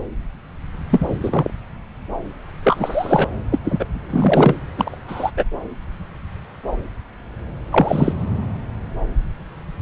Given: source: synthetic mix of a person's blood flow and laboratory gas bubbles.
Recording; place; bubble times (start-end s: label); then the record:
Doppler ultrasound of blood flow; subclavian vein
0.89-1.18 s: bubbles
1.21-1.50 s: bubbles
2.64-3.25 s: bubbles
3.50-3.58 s: bubbles
3.64-3.85 s: bubbles
4.10-4.55 s: bubbles
4.76-4.97 s: bubbles
5.08-5.31 s: bubbles
5.37-5.45 s: bubbles
7.72-8.12 s: bubbles
From the record:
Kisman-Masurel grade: 223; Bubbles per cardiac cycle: several, 3 to 8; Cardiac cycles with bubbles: 10 to 50%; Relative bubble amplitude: loud (0.450 to 0.775); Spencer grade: 2 (many but less than half of the cardiac periods contain bubble signals, singularly or in groups); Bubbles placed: anywhere in the cardiac cycle